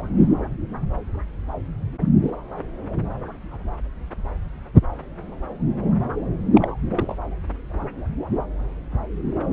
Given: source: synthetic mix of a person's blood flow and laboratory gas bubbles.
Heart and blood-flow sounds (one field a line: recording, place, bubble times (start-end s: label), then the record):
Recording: Doppler ultrasound of blood flow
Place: subclavian vein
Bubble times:
6.54-6.68 s: bubbles
6.94-7.15 s: bubbles
From the record:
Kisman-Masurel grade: 111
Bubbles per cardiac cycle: 1 to 2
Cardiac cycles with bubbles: 1 to 10%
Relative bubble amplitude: barely perceptible (0.100 to 0.250)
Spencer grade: 1 (occasional bubble signal discernible with the cardiac motion signal, with majority of cardiac periods free of bubbles)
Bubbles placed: anywhere in the cardiac cycle